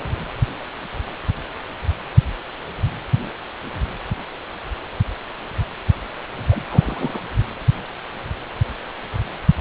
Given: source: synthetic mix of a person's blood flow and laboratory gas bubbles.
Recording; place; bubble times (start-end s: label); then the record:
Doppler ultrasound of blood flow; precordium
6.50-6.62 s: bubbles
6.69-7.21 s: bubbles
From the record:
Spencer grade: 1 (occasional bubble signal discernible with the cardiac motion signal, with majority of cardiac periods free of bubbles); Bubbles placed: anywhere in the cardiac cycle